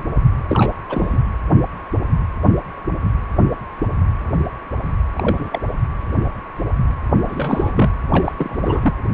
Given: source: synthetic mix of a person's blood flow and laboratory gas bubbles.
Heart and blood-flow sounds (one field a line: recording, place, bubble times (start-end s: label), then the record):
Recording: Doppler ultrasound of blood flow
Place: precordium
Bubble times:
0.48-0.72 s: bubbles
0.89-1.22 s: bubbles
5.13-5.61 s: bubbles
7.25-7.91 s: bubbles
8.12-8.32 s: bubbles
8.37-8.94 s: bubbles
From the record:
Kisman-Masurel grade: 222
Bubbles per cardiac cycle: several, 3 to 8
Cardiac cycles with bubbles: 10 to 50%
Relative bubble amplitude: moderate (0.250 to 0.450)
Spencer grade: 2 (many but less than half of the cardiac periods contain bubble signals, singularly or in groups)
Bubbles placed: anywhere in the cardiac cycle